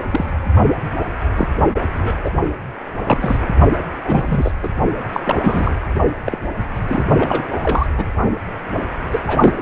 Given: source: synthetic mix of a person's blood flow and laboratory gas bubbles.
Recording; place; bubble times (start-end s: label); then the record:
Doppler ultrasound of blood flow; precordium
0.10-0.25 s: bubbles
1.35-1.49 s: bubbles
1.99-2.20 s: bubbles
2.24-2.30 s: bubbles
3.04-3.39 s: bubbles
4.05-4.52 s: bubbles
4.62-4.68 s: bubbles
5.12-5.20 s: bubbles
5.24-5.75 s: bubbles
6.24-6.38 s: bubbles
6.73-7.04 s: bubbles
7.18-7.43 s: bubbles
7.63-7.86 s: bubbles
7.97-8.11 s: bubbles
9.11-9.21 s: bubbles
9.27-9.62 s: bubbles
From the record:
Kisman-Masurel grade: 242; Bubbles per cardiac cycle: several, 3 to 8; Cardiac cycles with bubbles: 100%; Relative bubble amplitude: moderate (0.250 to 0.450); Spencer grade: 3 (all of the cardiac periods contain showers or single bubble signals, but not dominating or overriding the cardiac motion signals); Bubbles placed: only in the low amplitude regions of the cardiac cycle